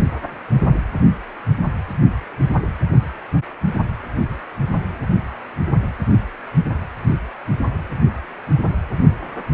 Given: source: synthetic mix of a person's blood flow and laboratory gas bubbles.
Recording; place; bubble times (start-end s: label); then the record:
Doppler ultrasound of blood flow; precordium
no bubbles
From the record:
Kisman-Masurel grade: 000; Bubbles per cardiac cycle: 0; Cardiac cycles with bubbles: 0%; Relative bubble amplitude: no bubbles discernible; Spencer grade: 0 (complete lack of bubble signals)